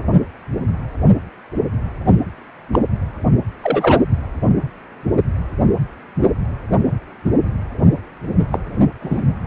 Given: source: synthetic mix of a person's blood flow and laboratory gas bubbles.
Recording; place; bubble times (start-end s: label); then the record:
Doppler ultrasound of blood flow; precordium
2.06-2.16 s: bubbles
2.73-2.79 s: bubbles
3.60-4.06 s: bubbles
8.52-8.59 s: bubbles
9.00-9.22 s: bubbles
From the record:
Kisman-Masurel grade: 123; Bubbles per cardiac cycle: 1 to 2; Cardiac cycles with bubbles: 10 to 50%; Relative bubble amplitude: loud (0.450 to 0.775); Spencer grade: 2 (many but less than half of the cardiac periods contain bubble signals, singularly or in groups); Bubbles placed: anywhere in the cardiac cycle